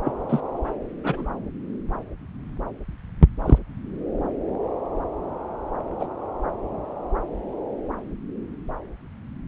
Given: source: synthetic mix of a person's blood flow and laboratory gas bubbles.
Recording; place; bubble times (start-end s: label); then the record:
Doppler ultrasound of blood flow; subclavian vein
0.05-0.12 s: bubbles
0.29-0.41 s: bubbles
1.03-1.29 s: bubbles
3.45-3.58 s: bubbles
5.99-6.07 s: bubbles
From the record:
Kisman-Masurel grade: 122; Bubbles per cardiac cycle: 1 to 2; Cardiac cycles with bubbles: 10 to 50%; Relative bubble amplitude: moderate (0.250 to 0.450); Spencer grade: 2 (many but less than half of the cardiac periods contain bubble signals, singularly or in groups); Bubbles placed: anywhere in the cardiac cycle